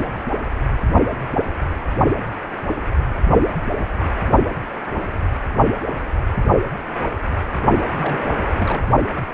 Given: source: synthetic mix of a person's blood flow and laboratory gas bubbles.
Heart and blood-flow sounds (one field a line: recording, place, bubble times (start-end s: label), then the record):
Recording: Doppler ultrasound of blood flow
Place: precordium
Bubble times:
7.88-8.32 s: bubbles
8.58-8.87 s: bubbles
From the record:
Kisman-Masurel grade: 211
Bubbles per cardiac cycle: several, 3 to 8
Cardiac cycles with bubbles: 1 to 10%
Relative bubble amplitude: barely perceptible (0.100 to 0.250)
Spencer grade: 1 (occasional bubble signal discernible with the cardiac motion signal, with majority of cardiac periods free of bubbles)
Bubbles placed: only in the low amplitude regions of the cardiac cycle